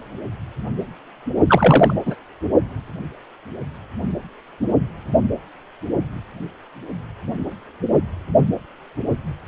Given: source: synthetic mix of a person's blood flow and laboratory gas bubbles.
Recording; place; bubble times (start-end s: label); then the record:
Doppler ultrasound of blood flow; precordium
1.47-1.94 s: bubbles
2.05-2.15 s: bubbles
From the record:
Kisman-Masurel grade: 213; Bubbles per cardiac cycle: several, 3 to 8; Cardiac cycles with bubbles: 1 to 10%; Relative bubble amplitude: loud (0.450 to 0.775); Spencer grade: 1 (occasional bubble signal discernible with the cardiac motion signal, with majority of cardiac periods free of bubbles); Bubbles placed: only in the low amplitude regions of the cardiac cycle